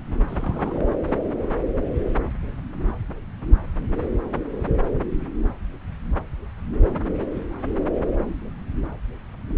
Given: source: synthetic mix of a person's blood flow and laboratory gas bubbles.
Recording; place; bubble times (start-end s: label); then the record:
Doppler ultrasound of blood flow; subclavian vein
0.28-0.88 s: bubbles
From the record:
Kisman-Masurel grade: 121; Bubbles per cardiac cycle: 1 to 2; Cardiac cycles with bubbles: 10 to 50%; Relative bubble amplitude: barely perceptible (0.100 to 0.250); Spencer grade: 2 (many but less than half of the cardiac periods contain bubble signals, singularly or in groups); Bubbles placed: anywhere in the cardiac cycle